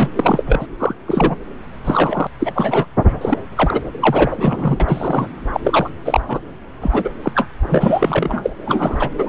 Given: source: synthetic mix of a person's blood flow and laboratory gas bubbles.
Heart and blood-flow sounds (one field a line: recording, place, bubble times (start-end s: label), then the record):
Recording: Doppler ultrasound of blood flow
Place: subclavian vein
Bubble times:
0.00-0.09 s: bubbles
0.16-0.44 s: bubbles
0.47-0.67 s: bubbles
0.80-0.94 s: bubbles
1.06-1.37 s: bubbles
1.84-2.27 s: bubbles
2.40-2.85 s: bubbles
3.21-3.39 s: bubbles
3.55-3.81 s: bubbles
4.00-4.77 s: bubbles
4.80-5.28 s: bubbles
5.54-5.60 s: bubbles
5.63-5.89 s: bubbles
6.05-6.21 s: bubbles
6.28-6.39 s: bubbles
6.80-7.09 s: bubbles
7.23-7.31 s: bubbles
7.34-7.47 s: bubbles
7.63-8.50 s: bubbles
8.66-9.10 s: bubbles
9.18-9.29 s: bubbles
From the record:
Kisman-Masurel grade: 243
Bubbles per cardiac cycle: several, 3 to 8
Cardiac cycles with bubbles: 100%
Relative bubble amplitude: loud (0.450 to 0.775)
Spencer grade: 3 (all of the cardiac periods contain showers or single bubble signals, but not dominating or overriding the cardiac motion signals)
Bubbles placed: anywhere in the cardiac cycle